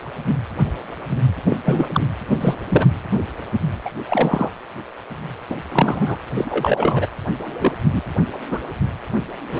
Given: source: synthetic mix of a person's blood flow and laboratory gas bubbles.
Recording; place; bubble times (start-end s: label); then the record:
Doppler ultrasound of blood flow; precordium
1.49-1.56 s: bubbles
1.65-1.89 s: bubbles
1.92-2.06 s: bubbles
2.40-2.54 s: bubbles
2.69-2.86 s: bubbles
3.85-3.90 s: bubbles
4.08-4.50 s: bubbles
5.50-5.56 s: bubbles
5.72-6.18 s: bubbles
6.33-7.07 s: bubbles
7.43-7.75 s: bubbles
7.89-8.13 s: bubbles
8.51-8.60 s: bubbles
9.50-9.60 s: bubbles
From the record:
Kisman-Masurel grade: 233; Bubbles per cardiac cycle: several, 3 to 8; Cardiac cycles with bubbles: 50 to 99%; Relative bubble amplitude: loud (0.450 to 0.775); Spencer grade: 3 (all of the cardiac periods contain showers or single bubble signals, but not dominating or overriding the cardiac motion signals); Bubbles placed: anywhere in the cardiac cycle